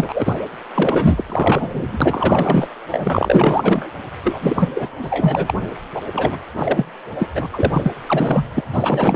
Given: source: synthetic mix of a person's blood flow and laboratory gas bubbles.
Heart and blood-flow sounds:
Doppler ultrasound of blood flow; precordium
0.00-0.39 s: bubbles
0.74-1.24 s: bubbles
1.28-1.98 s: bubbles
2.00-2.68 s: bubbles
2.91-3.92 s: bubbles
4.24-4.69 s: bubbles
4.75-4.89 s: bubbles
5.02-5.54 s: bubbles
5.92-6.01 s: bubbles
6.13-6.39 s: bubbles
6.58-6.84 s: bubbles
7.18-7.27 s: bubbles
7.35-7.46 s: bubbles
7.53-7.92 s: bubbles
8.06-8.47 s: bubbles
8.54-8.61 s: bubbles
8.73-9.15 s: bubbles
From the record:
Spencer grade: 4 (maximum detectable bubble signal sounding continuously throughout systole and diastole of every cardiac period, and overriding the amplitude of the normal cardiac signals); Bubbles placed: anywhere in the cardiac cycle

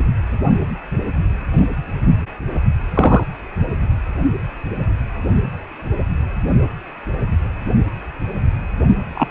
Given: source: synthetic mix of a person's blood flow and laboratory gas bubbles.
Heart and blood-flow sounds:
Doppler ultrasound of blood flow; precordium
2.94-3.23 s: bubbles
9.14-9.28 s: bubbles
From the record:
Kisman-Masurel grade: 123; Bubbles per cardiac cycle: 1 to 2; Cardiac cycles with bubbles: 10 to 50%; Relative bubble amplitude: loud (0.450 to 0.775); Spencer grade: 2 (many but less than half of the cardiac periods contain bubble signals, singularly or in groups); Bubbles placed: only in the low amplitude regions of the cardiac cycle

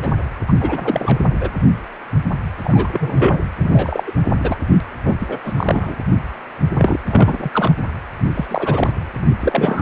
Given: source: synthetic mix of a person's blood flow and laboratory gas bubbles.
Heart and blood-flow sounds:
Doppler ultrasound of blood flow; precordium
0.02-0.10 s: bubbles
0.48-0.53 s: bubbles
0.60-1.18 s: bubbles
1.41-1.50 s: bubbles
2.64-3.40 s: bubbles
3.59-4.04 s: bubbles
4.07-4.12 s: bubbles
4.39-4.56 s: bubbles
5.06-5.14 s: bubbles
5.21-5.38 s: bubbles
5.44-5.54 s: bubbles
5.57-5.96 s: bubbles
6.78-7.00 s: bubbles
7.08-7.50 s: bubbles
7.53-7.74 s: bubbles
8.34-8.46 s: bubbles
8.48-8.93 s: bubbles
9.18-9.31 s: bubbles
9.39-9.82 s: bubbles
From the record:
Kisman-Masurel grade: 232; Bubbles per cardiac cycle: several, 3 to 8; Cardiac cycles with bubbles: 50 to 99%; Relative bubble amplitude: moderate (0.250 to 0.450); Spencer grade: 3 (all of the cardiac periods contain showers or single bubble signals, but not dominating or overriding the cardiac motion signals); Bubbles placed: anywhere in the cardiac cycle

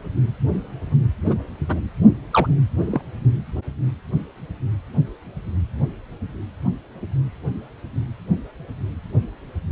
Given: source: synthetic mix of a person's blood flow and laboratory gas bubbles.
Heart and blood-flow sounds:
Doppler ultrasound of blood flow; precordium
1.23-1.34 s: bubbles
1.67-1.80 s: bubbles
2.32-2.47 s: bubbles
2.92-3.01 s: bubbles
From the record:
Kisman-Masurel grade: 112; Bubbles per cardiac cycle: 1 to 2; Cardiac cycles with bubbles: 1 to 10%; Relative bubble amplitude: moderate (0.250 to 0.450); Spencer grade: 1 (occasional bubble signal discernible with the cardiac motion signal, with majority of cardiac periods free of bubbles); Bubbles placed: anywhere in the cardiac cycle

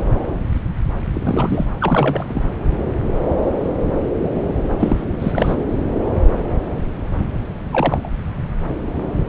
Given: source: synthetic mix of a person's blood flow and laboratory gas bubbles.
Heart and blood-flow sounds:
Doppler ultrasound of blood flow; subclavian vein
1.13-1.66 s: bubbles
1.80-2.25 s: bubbles
2.27-2.42 s: bubbles
4.78-5.05 s: bubbles
5.20-5.55 s: bubbles
7.72-8.09 s: bubbles
From the record:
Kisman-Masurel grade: 222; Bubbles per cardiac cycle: several, 3 to 8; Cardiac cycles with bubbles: 10 to 50%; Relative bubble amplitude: moderate (0.250 to 0.450); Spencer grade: 2 (many but less than half of the cardiac periods contain bubble signals, singularly or in groups); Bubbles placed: anywhere in the cardiac cycle

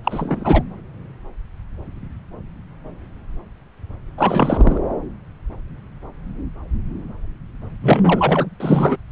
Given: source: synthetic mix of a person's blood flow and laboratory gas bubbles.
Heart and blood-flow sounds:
Doppler ultrasound of blood flow; subclavian vein
0.04-0.63 s: bubbles
4.17-4.78 s: bubbles
7.82-8.46 s: bubbles
8.60-8.96 s: bubbles
From the record:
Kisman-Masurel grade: 223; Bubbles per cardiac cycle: several, 3 to 8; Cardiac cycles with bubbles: 10 to 50%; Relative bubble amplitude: loud (0.450 to 0.775); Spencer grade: 2 (many but less than half of the cardiac periods contain bubble signals, singularly or in groups); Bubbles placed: anywhere in the cardiac cycle

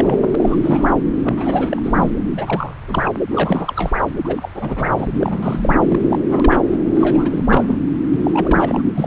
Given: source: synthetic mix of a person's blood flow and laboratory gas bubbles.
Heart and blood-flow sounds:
Doppler ultrasound of blood flow; subclavian vein
0.00-0.94 s: bubbles
1.23-2.10 s: bubbles
2.36-2.75 s: bubbles
2.88-3.13 s: bubbles
3.31-3.91 s: bubbles
4.25-4.49 s: bubbles
4.54-5.75 s: bubbles
5.90-6.00 s: bubbles
6.10-6.19 s: bubbles
6.29-6.58 s: bubbles
6.95-7.78 s: bubbles
8.11-8.82 s: bubbles
8.97-9.07 s: bubbles
From the record:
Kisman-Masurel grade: 342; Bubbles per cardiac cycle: rolling drumbeat, 9 or more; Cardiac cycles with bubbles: 100%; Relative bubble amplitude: moderate (0.250 to 0.450); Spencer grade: 3 (all of the cardiac periods contain showers or single bubble signals, but not dominating or overriding the cardiac motion signals); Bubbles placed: anywhere in the cardiac cycle

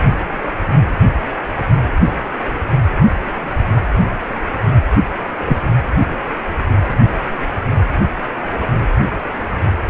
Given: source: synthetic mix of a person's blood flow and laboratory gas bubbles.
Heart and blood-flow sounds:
Doppler ultrasound of blood flow; precordium
5.46-5.58 s: bubbles
From the record:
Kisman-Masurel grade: 113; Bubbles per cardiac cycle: 1 to 2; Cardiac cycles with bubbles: 1 to 10%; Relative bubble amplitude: loud (0.450 to 0.775); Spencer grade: 1 (occasional bubble signal discernible with the cardiac motion signal, with majority of cardiac periods free of bubbles); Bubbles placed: only in the low amplitude regions of the cardiac cycle

